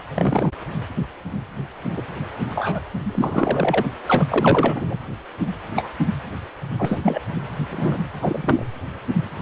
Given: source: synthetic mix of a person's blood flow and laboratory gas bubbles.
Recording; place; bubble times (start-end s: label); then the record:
Doppler ultrasound of blood flow; precordium
0.14-0.51 s: bubbles
1.96-2.01 s: bubbles
2.50-2.79 s: bubbles
3.03-3.85 s: bubbles
4.07-4.99 s: bubbles
5.76-5.90 s: bubbles
6.79-7.00 s: bubbles
7.03-7.20 s: bubbles
7.70-7.99 s: bubbles
8.21-8.66 s: bubbles
From the record:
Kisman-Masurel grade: 232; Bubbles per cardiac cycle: several, 3 to 8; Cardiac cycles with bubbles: 50 to 99%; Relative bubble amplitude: moderate (0.250 to 0.450); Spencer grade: 3 (all of the cardiac periods contain showers or single bubble signals, but not dominating or overriding the cardiac motion signals); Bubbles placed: anywhere in the cardiac cycle